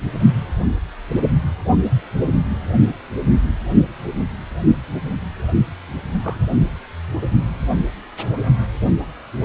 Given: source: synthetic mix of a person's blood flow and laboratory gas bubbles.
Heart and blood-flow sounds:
Doppler ultrasound of blood flow; precordium
6.21-6.39 s: bubbles
7.22-7.30 s: bubbles
From the record:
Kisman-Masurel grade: 111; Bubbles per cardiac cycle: 1 to 2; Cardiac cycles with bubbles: 1 to 10%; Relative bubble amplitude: barely perceptible (0.100 to 0.250); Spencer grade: 1 (occasional bubble signal discernible with the cardiac motion signal, with majority of cardiac periods free of bubbles); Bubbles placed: only in the low amplitude regions of the cardiac cycle

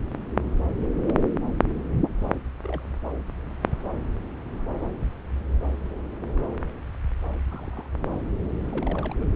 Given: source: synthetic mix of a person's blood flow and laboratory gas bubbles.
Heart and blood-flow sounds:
Doppler ultrasound of blood flow; subclavian vein
0.96-1.16 s: bubbles
2.18-2.35 s: bubbles
2.62-2.83 s: bubbles
7.49-7.87 s: bubbles
8.09-8.14 s: bubbles
8.71-9.16 s: bubbles
9.19-9.25 s: bubbles
From the record:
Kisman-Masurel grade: 121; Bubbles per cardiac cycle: 1 to 2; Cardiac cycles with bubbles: 10 to 50%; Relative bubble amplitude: barely perceptible (0.100 to 0.250); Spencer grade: 2 (many but less than half of the cardiac periods contain bubble signals, singularly or in groups); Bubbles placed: anywhere in the cardiac cycle

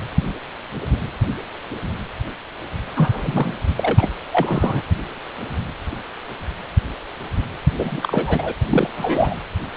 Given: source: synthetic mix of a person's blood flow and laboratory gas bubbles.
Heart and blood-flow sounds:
Doppler ultrasound of blood flow; precordium
2.96-3.54 s: bubbles
3.76-4.09 s: bubbles
4.31-4.81 s: bubbles
7.73-8.52 s: bubbles
8.71-8.88 s: bubbles
8.96-9.36 s: bubbles
From the record:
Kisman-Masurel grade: 222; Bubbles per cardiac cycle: several, 3 to 8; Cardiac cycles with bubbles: 10 to 50%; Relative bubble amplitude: moderate (0.250 to 0.450); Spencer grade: 2 (many but less than half of the cardiac periods contain bubble signals, singularly or in groups); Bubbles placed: anywhere in the cardiac cycle

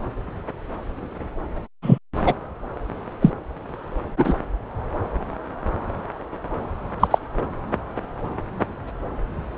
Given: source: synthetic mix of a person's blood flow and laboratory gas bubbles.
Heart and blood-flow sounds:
Doppler ultrasound of blood flow; subclavian vein
1.82-1.98 s: bubbles
2.25-2.34 s: bubbles
3.21-3.30 s: bubbles
4.18-4.35 s: bubbles
7.00-7.08 s: bubbles
7.11-7.18 s: bubbles
From the record:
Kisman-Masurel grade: 123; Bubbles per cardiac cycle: 1 to 2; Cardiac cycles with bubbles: 10 to 50%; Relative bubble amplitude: loud (0.450 to 0.775); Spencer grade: 2 (many but less than half of the cardiac periods contain bubble signals, singularly or in groups); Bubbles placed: anywhere in the cardiac cycle

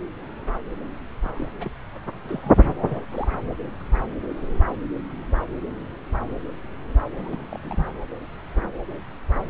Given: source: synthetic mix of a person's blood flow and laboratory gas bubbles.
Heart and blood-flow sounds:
Doppler ultrasound of blood flow; subclavian vein
1.23-1.29 s: bubbles
1.35-1.47 s: bubbles
1.57-1.71 s: bubbles
2.29-2.62 s: bubbles
2.89-3.04 s: bubbles
3.10-3.27 s: bubbles
7.13-7.46 s: bubbles
7.50-7.59 s: bubbles
7.62-7.85 s: bubbles
From the record:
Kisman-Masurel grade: 221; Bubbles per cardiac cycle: several, 3 to 8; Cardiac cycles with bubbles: 10 to 50%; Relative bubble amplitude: barely perceptible (0.100 to 0.250); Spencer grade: 2 (many but less than half of the cardiac periods contain bubble signals, singularly or in groups); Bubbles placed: anywhere in the cardiac cycle

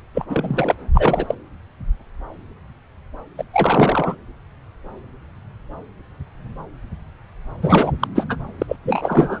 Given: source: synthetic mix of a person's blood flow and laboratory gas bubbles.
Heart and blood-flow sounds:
Doppler ultrasound of blood flow; subclavian vein
0.14-0.26 s: bubbles
0.29-0.75 s: bubbles
0.94-1.34 s: bubbles
3.38-3.44 s: bubbles
3.53-4.15 s: bubbles
7.62-7.93 s: bubbles
7.99-8.07 s: bubbles
8.15-8.27 s: bubbles
8.29-8.38 s: bubbles
8.58-8.77 s: bubbles
8.85-9.40 s: bubbles
From the record:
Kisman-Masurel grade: 333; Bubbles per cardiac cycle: rolling drumbeat, 9 or more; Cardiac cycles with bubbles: 50 to 99%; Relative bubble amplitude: loud (0.450 to 0.775); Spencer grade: 3 (all of the cardiac periods contain showers or single bubble signals, but not dominating or overriding the cardiac motion signals); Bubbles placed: anywhere in the cardiac cycle

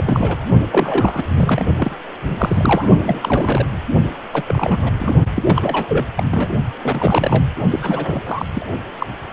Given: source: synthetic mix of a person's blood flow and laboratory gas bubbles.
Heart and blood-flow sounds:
Doppler ultrasound of blood flow; precordium
0.00-0.36 s: bubbles
0.71-1.27 s: bubbles
1.36-1.65 s: bubbles
1.76-1.95 s: bubbles
2.26-2.88 s: bubbles
3.04-3.19 s: bubbles
3.22-3.67 s: bubbles
4.32-4.44 s: bubbles
4.46-4.91 s: bubbles
4.99-5.15 s: bubbles
5.34-5.42 s: bubbles
5.46-6.06 s: bubbles
6.16-6.24 s: bubbles
6.31-6.49 s: bubbles
6.82-7.44 s: bubbles
7.70-7.79 s: bubbles
7.82-8.46 s: bubbles
8.54-8.68 s: bubbles
8.98-9.06 s: bubbles
From the record:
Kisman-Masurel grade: 332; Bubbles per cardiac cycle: rolling drumbeat, 9 or more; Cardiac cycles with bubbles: 50 to 99%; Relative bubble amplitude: moderate (0.250 to 0.450); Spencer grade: 3 (all of the cardiac periods contain showers or single bubble signals, but not dominating or overriding the cardiac motion signals); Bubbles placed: only in the low amplitude regions of the cardiac cycle

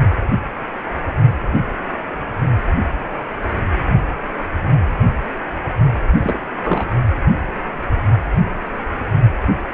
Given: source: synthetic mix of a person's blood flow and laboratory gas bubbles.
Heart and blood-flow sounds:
Doppler ultrasound of blood flow; precordium
6.24-6.42 s: bubbles
6.63-6.88 s: bubbles
From the record:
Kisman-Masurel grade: 212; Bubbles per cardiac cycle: several, 3 to 8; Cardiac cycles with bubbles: 1 to 10%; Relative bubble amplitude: moderate (0.250 to 0.450); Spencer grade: 1 (occasional bubble signal discernible with the cardiac motion signal, with majority of cardiac periods free of bubbles); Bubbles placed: anywhere in the cardiac cycle

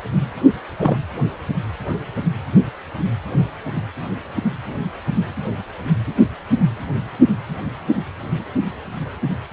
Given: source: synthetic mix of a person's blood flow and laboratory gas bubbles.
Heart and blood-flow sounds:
Doppler ultrasound of blood flow; precordium
0.78-0.98 s: bubbles
From the record:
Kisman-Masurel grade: 112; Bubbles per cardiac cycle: 1 to 2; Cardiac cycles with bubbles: 1 to 10%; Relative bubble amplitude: moderate (0.250 to 0.450); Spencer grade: 1 (occasional bubble signal discernible with the cardiac motion signal, with majority of cardiac periods free of bubbles); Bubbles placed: anywhere in the cardiac cycle

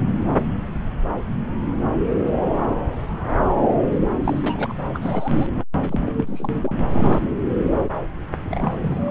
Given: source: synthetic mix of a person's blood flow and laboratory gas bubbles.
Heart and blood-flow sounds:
Doppler ultrasound of blood flow; subclavian vein
4.24-4.73 s: bubbles
4.93-5.47 s: bubbles
5.82-6.14 s: bubbles
6.17-6.54 s: bubbles
6.62-6.75 s: bubbles
6.88-7.31 s: bubbles
8.48-9.11 s: bubbles
From the record:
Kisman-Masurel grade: 222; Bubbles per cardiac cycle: several, 3 to 8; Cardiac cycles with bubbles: 10 to 50%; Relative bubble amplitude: moderate (0.250 to 0.450); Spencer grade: 2 (many but less than half of the cardiac periods contain bubble signals, singularly or in groups); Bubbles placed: anywhere in the cardiac cycle

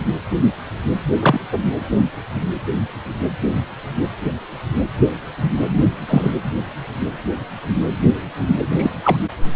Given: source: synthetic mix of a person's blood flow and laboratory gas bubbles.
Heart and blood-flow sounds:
Doppler ultrasound of blood flow; precordium
1.19-1.40 s: bubbles
1.52-1.58 s: bubbles
6.08-6.31 s: bubbles
8.71-8.90 s: bubbles
9.04-9.16 s: bubbles
From the record:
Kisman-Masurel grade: 123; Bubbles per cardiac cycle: 1 to 2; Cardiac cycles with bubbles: 10 to 50%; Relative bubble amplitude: loud (0.450 to 0.775); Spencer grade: 2 (many but less than half of the cardiac periods contain bubble signals, singularly or in groups); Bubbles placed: anywhere in the cardiac cycle

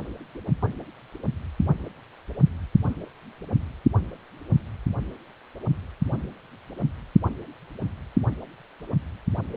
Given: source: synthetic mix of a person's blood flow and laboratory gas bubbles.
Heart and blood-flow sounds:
Doppler ultrasound of blood flow; precordium
no bubbles
From the record:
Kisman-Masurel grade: 000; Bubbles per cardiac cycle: 0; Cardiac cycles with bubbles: 0%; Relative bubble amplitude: no bubbles discernible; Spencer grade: 0 (complete lack of bubble signals)

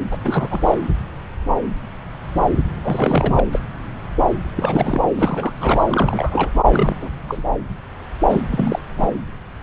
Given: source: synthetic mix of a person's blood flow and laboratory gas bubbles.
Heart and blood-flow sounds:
Doppler ultrasound of blood flow; subclavian vein
0.11-0.17 s: bubbles
0.24-0.75 s: bubbles
2.81-3.45 s: bubbles
3.52-3.60 s: bubbles
4.56-5.01 s: bubbles
5.16-5.52 s: bubbles
5.59-6.50 s: bubbles
6.72-6.96 s: bubbles
7.01-7.09 s: bubbles
7.27-7.42 s: bubbles
8.29-8.44 s: bubbles
8.51-8.79 s: bubbles
9.00-9.09 s: bubbles
From the record:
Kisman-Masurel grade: 332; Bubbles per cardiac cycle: rolling drumbeat, 9 or more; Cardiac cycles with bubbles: 50 to 99%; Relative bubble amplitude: moderate (0.250 to 0.450); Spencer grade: 3 (all of the cardiac periods contain showers or single bubble signals, but not dominating or overriding the cardiac motion signals); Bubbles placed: anywhere in the cardiac cycle

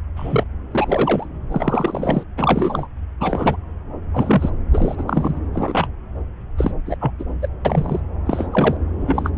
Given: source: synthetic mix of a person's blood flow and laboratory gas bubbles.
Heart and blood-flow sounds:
Doppler ultrasound of blood flow; subclavian vein
0.16-0.44 s: bubbles
0.74-1.27 s: bubbles
1.51-2.23 s: bubbles
2.37-2.88 s: bubbles
3.20-3.57 s: bubbles
4.12-4.50 s: bubbles
4.73-5.04 s: bubbles
5.07-5.39 s: bubbles
5.53-5.87 s: bubbles
6.58-6.72 s: bubbles
6.86-6.96 s: bubbles
7.00-7.12 s: bubbles
7.19-7.24 s: bubbles
7.42-7.48 s: bubbles
7.65-8.00 s: bubbles
8.25-8.47 s: bubbles
8.51-8.77 s: bubbles
9.00-9.30 s: bubbles
From the record:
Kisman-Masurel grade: 242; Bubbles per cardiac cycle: several, 3 to 8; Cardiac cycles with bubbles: 100%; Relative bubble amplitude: moderate (0.250 to 0.450); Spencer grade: 3 (all of the cardiac periods contain showers or single bubble signals, but not dominating or overriding the cardiac motion signals); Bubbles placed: anywhere in the cardiac cycle

